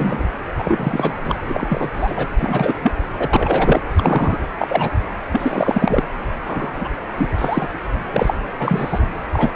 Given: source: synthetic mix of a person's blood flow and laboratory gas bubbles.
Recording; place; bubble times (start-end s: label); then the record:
Doppler ultrasound of blood flow; precordium
0.00-0.24 s: bubbles
0.58-1.14 s: bubbles
1.24-1.35 s: bubbles
1.48-1.89 s: bubbles
1.93-2.27 s: bubbles
2.38-2.75 s: bubbles
2.82-2.92 s: bubbles
3.19-3.81 s: bubbles
3.99-4.38 s: bubbles
4.58-4.92 s: bubbles
5.31-6.04 s: bubbles
6.42-6.71 s: bubbles
6.76-6.89 s: bubbles
7.17-7.31 s: bubbles
7.38-7.69 s: bubbles
8.12-8.35 s: bubbles
8.59-9.00 s: bubbles
9.32-9.53 s: bubbles
From the record:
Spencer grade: 3 (all of the cardiac periods contain showers or single bubble signals, but not dominating or overriding the cardiac motion signals); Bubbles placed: anywhere in the cardiac cycle